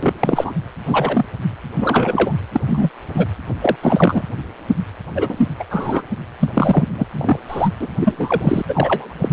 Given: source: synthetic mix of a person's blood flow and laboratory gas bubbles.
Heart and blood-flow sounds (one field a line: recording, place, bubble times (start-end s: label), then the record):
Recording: Doppler ultrasound of blood flow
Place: precordium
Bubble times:
0.02-0.12 s: bubbles
0.19-0.54 s: bubbles
0.85-1.25 s: bubbles
1.77-2.33 s: bubbles
2.52-2.61 s: bubbles
2.67-2.90 s: bubbles
3.14-3.27 s: bubbles
3.61-3.76 s: bubbles
3.81-4.22 s: bubbles
5.15-5.46 s: bubbles
5.59-5.64 s: bubbles
5.71-6.02 s: bubbles
6.39-6.50 s: bubbles
6.53-6.84 s: bubbles
6.94-7.05 s: bubbles
7.12-7.39 s: bubbles
7.48-7.70 s: bubbles
7.80-7.88 s: bubbles
7.99-8.62 s: bubbles
8.68-9.14 s: bubbles
9.21-9.29 s: bubbles
From the record:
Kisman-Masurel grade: 233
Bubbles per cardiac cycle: several, 3 to 8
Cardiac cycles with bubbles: 50 to 99%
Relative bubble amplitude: loud (0.450 to 0.775)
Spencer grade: 3 (all of the cardiac periods contain showers or single bubble signals, but not dominating or overriding the cardiac motion signals)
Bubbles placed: anywhere in the cardiac cycle